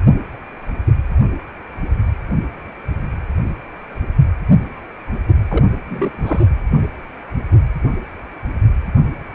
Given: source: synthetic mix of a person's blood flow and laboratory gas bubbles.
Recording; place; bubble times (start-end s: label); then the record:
Doppler ultrasound of blood flow; precordium
5.48-5.65 s: bubbles
5.88-6.44 s: bubbles
From the record:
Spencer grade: 2 (many but less than half of the cardiac periods contain bubble signals, singularly or in groups); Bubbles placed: anywhere in the cardiac cycle